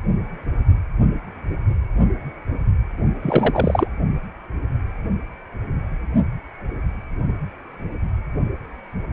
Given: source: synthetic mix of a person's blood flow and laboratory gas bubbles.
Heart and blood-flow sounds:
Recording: Doppler ultrasound of blood flow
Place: precordium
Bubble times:
3.23-3.88 s: bubbles
From the record:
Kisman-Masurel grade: 213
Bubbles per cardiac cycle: several, 3 to 8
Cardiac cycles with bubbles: 1 to 10%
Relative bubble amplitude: loud (0.450 to 0.775)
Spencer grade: 1 (occasional bubble signal discernible with the cardiac motion signal, with majority of cardiac periods free of bubbles)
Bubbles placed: only in the low amplitude regions of the cardiac cycle

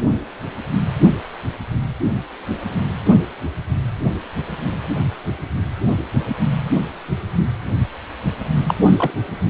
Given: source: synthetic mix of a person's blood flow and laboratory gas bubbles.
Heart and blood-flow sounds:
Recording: Doppler ultrasound of blood flow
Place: precordium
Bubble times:
8.68-8.75 s: bubbles
8.87-9.11 s: bubbles
From the record:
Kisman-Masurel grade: 212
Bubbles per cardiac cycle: several, 3 to 8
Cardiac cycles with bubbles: 1 to 10%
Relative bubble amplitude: moderate (0.250 to 0.450)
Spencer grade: 1 (occasional bubble signal discernible with the cardiac motion signal, with majority of cardiac periods free of bubbles)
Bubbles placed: only in the low amplitude regions of the cardiac cycle

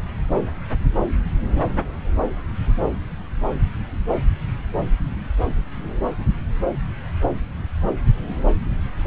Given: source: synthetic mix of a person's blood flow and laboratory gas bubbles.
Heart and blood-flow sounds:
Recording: Doppler ultrasound of blood flow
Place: subclavian vein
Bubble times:
no bubbles
From the record:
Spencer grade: 0 (complete lack of bubble signals)

